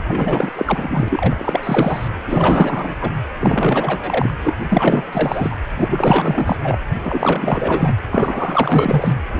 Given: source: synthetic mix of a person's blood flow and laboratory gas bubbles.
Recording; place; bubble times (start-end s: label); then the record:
Doppler ultrasound of blood flow; precordium
0.03-0.53 s: bubbles
0.55-2.08 s: bubbles
2.26-2.96 s: bubbles
3.00-3.11 s: bubbles
3.40-4.34 s: bubbles
4.44-4.54 s: bubbles
4.70-5.03 s: bubbles
5.12-5.56 s: bubbles
5.78-6.56 s: bubbles
6.62-6.78 s: bubbles
7.04-7.98 s: bubbles
8.10-9.17 s: bubbles
9.32-9.40 s: bubbles
From the record:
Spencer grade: 4 (maximum detectable bubble signal sounding continuously throughout systole and diastole of every cardiac period, and overriding the amplitude of the normal cardiac signals); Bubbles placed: anywhere in the cardiac cycle